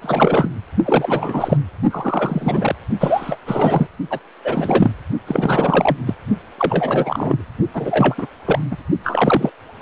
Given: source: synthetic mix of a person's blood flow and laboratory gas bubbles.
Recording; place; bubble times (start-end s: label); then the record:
Doppler ultrasound of blood flow; precordium
0.01-0.49 s: bubbles
0.84-1.58 s: bubbles
1.90-2.75 s: bubbles
3.00-3.38 s: bubbles
3.46-3.87 s: bubbles
4.10-4.19 s: bubbles
4.44-4.91 s: bubbles
5.26-5.96 s: bubbles
6.06-6.14 s: bubbles
6.58-7.44 s: bubbles
7.74-8.15 s: bubbles
8.18-8.27 s: bubbles
8.46-8.59 s: bubbles
8.71-8.77 s: bubbles
9.04-9.50 s: bubbles
9.80-9.82 s: bubbles
From the record:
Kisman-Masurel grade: 342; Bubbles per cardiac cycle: rolling drumbeat, 9 or more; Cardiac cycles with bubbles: 100%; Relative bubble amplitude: moderate (0.250 to 0.450); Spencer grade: 3 (all of the cardiac periods contain showers or single bubble signals, but not dominating or overriding the cardiac motion signals); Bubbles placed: only in the low amplitude regions of the cardiac cycle